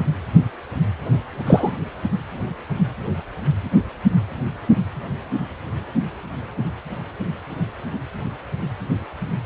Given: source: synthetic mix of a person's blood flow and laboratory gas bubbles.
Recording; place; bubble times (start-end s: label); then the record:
Doppler ultrasound of blood flow; precordium
1.46-1.72 s: bubbles
From the record:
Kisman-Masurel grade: 113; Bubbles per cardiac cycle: 1 to 2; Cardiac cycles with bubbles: 1 to 10%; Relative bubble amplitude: loud (0.450 to 0.775); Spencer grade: 1 (occasional bubble signal discernible with the cardiac motion signal, with majority of cardiac periods free of bubbles); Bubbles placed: anywhere in the cardiac cycle